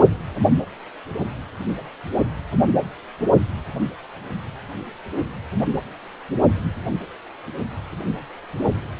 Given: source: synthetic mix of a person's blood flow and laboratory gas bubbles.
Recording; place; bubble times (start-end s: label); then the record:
Doppler ultrasound of blood flow; precordium
no bubbles
From the record:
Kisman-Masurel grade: 000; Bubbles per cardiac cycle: 0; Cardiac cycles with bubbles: 0%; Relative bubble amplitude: no bubbles discernible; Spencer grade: 0 (complete lack of bubble signals)